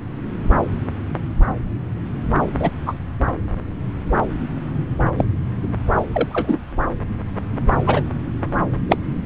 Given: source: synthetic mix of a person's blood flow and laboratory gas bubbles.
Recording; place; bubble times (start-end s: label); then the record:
Doppler ultrasound of blood flow; subclavian vein
2.59-2.71 s: bubbles
2.86-2.93 s: bubbles
5.17-5.25 s: bubbles
6.12-6.59 s: bubbles
7.86-8.02 s: bubbles
8.89-8.98 s: bubbles
From the record:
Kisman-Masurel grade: 123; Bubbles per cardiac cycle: 1 to 2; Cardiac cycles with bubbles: 10 to 50%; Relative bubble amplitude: loud (0.450 to 0.775); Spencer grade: 2 (many but less than half of the cardiac periods contain bubble signals, singularly or in groups); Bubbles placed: anywhere in the cardiac cycle